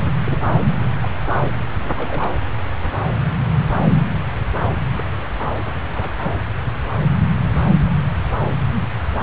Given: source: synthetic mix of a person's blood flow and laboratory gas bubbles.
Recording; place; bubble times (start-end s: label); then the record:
Doppler ultrasound of blood flow; subclavian vein
0.21-0.38 s: bubbles
1.02-1.08 s: bubbles
1.83-1.90 s: bubbles
1.97-2.36 s: bubbles
4.91-5.07 s: bubbles
5.95-6.09 s: bubbles
6.24-6.35 s: bubbles
From the record:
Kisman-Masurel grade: 121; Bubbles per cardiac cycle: 1 to 2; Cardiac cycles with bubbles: 10 to 50%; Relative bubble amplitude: barely perceptible (0.100 to 0.250); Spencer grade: 2 (many but less than half of the cardiac periods contain bubble signals, singularly or in groups); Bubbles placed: anywhere in the cardiac cycle